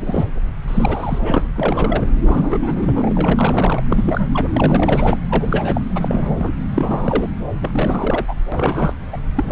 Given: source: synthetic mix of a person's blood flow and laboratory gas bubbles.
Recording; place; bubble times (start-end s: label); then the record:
Doppler ultrasound of blood flow; subclavian vein
0.00-0.27 s: bubbles
0.68-1.47 s: bubbles
1.56-2.10 s: bubbles
2.25-2.59 s: bubbles
2.62-3.80 s: bubbles
3.89-4.27 s: bubbles
4.33-4.48 s: bubbles
4.54-5.19 s: bubbles
5.30-5.81 s: bubbles
5.95-6.29 s: bubbles
6.38-6.52 s: bubbles
6.70-7.28 s: bubbles
7.61-8.34 s: bubbles
8.52-8.94 s: bubbles
9.12-9.17 s: bubbles
9.35-9.52 s: bubbles
From the record:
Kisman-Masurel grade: 342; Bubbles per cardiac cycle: rolling drumbeat, 9 or more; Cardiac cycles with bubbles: 100%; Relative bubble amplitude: moderate (0.250 to 0.450); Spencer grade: 3 (all of the cardiac periods contain showers or single bubble signals, but not dominating or overriding the cardiac motion signals); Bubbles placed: anywhere in the cardiac cycle